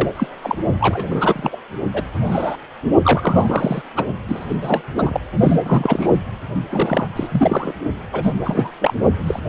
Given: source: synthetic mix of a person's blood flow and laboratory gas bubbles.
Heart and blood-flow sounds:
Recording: Doppler ultrasound of blood flow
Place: precordium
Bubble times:
0.00-0.09 s: bubbles
0.16-0.27 s: bubbles
0.42-0.55 s: bubbles
0.80-1.58 s: bubbles
1.93-2.03 s: bubbles
2.24-2.57 s: bubbles
3.02-3.82 s: bubbles
3.96-4.06 s: bubbles
4.28-4.46 s: bubbles
4.48-4.56 s: bubbles
4.62-4.82 s: bubbles
4.97-5.20 s: bubbles
5.41-5.57 s: bubbles
5.66-6.16 s: bubbles
6.70-7.08 s: bubbles
7.16-7.73 s: bubbles
8.12-8.33 s: bubbles
8.46-8.71 s: bubbles
8.80-8.94 s: bubbles
9.18-9.39 s: bubbles
From the record:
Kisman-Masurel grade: 243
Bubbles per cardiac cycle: several, 3 to 8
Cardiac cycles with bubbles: 100%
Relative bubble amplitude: loud (0.450 to 0.775)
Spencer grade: 3 (all of the cardiac periods contain showers or single bubble signals, but not dominating or overriding the cardiac motion signals)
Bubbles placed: only in the low amplitude regions of the cardiac cycle

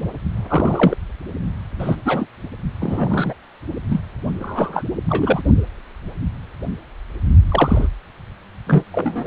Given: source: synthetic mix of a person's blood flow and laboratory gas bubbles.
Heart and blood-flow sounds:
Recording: Doppler ultrasound of blood flow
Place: precordium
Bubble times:
0.49-0.96 s: bubbles
1.79-1.96 s: bubbles
2.04-2.27 s: bubbles
2.79-3.33 s: bubbles
3.90-4.01 s: bubbles
4.41-4.83 s: bubbles
5.08-5.42 s: bubbles
7.49-7.89 s: bubbles
8.66-8.83 s: bubbles
8.92-9.27 s: bubbles
From the record:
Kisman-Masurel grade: 233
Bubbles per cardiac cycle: several, 3 to 8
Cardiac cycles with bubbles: 50 to 99%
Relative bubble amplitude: loud (0.450 to 0.775)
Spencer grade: 3 (all of the cardiac periods contain showers or single bubble signals, but not dominating or overriding the cardiac motion signals)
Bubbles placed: only in the low amplitude regions of the cardiac cycle

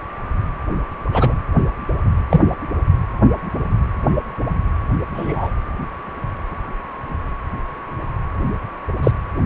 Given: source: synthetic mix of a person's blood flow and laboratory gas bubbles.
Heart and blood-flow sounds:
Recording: Doppler ultrasound of blood flow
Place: precordium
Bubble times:
1.11-1.33 s: bubbles
2.30-2.41 s: bubbles
5.14-5.51 s: bubbles
9.02-9.12 s: bubbles
From the record:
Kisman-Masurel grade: 123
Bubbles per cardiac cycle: 1 to 2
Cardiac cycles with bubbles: 10 to 50%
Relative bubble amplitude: loud (0.450 to 0.775)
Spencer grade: 2 (many but less than half of the cardiac periods contain bubble signals, singularly or in groups)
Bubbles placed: anywhere in the cardiac cycle

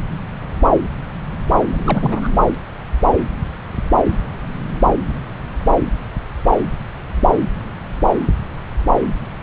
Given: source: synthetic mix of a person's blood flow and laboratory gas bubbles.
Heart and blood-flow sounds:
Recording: Doppler ultrasound of blood flow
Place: subclavian vein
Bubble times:
1.71-2.29 s: bubbles
From the record:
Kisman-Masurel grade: 212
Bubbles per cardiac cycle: several, 3 to 8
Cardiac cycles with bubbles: 1 to 10%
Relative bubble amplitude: moderate (0.250 to 0.450)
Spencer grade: 1 (occasional bubble signal discernible with the cardiac motion signal, with majority of cardiac periods free of bubbles)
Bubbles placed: anywhere in the cardiac cycle

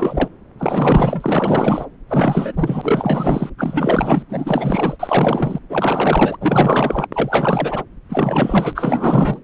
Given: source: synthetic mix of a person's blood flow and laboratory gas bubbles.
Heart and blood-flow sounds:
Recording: Doppler ultrasound of blood flow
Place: subclavian vein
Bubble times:
0.00-0.29 s: bubbles
0.59-1.86 s: bubbles
2.08-3.50 s: bubbles
3.58-4.22 s: bubbles
4.29-5.59 s: bubbles
5.70-6.37 s: bubbles
6.41-7.07 s: bubbles
7.13-7.83 s: bubbles
8.09-9.40 s: bubbles
From the record:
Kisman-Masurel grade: 444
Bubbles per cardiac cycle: continuous sound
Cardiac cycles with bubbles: 100%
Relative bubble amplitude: maximal (0.775 to 0.999)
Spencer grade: 4 (maximum detectable bubble signal sounding continuously throughout systole and diastole of every cardiac period, and overriding the amplitude of the normal cardiac signals)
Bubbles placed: anywhere in the cardiac cycle

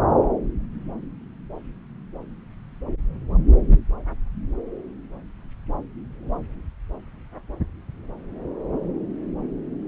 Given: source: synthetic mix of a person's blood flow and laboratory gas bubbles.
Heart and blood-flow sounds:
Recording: Doppler ultrasound of blood flow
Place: subclavian vein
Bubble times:
no bubbles
From the record:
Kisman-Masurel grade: 000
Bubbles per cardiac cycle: 0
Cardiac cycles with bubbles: 0%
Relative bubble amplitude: no bubbles discernible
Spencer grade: 0 (complete lack of bubble signals)

